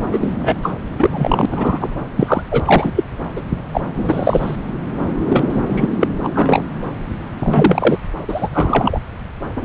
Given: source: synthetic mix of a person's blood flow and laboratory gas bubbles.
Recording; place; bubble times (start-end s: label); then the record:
Doppler ultrasound of blood flow; subclavian vein
0.11-0.34 s: bubbles
0.39-0.54 s: bubbles
0.62-0.72 s: bubbles
0.98-1.45 s: bubbles
1.50-1.89 s: bubbles
2.16-2.42 s: bubbles
2.51-2.60 s: bubbles
2.65-2.91 s: bubbles
2.96-3.04 s: bubbles
3.36-3.41 s: bubbles
3.72-3.81 s: bubbles
3.95-4.56 s: bubbles
5.29-5.46 s: bubbles
5.49-5.62 s: bubbles
5.69-5.87 s: bubbles
6.00-6.08 s: bubbles
6.23-6.29 s: bubbles
6.34-6.65 s: bubbles
7.40-8.00 s: bubbles
8.28-8.48 s: bubbles
8.53-8.99 s: bubbles
9.56-9.65 s: bubbles
From the record:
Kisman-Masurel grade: 243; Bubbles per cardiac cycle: several, 3 to 8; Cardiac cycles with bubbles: 100%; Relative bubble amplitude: loud (0.450 to 0.775); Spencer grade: 3 (all of the cardiac periods contain showers or single bubble signals, but not dominating or overriding the cardiac motion signals); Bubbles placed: anywhere in the cardiac cycle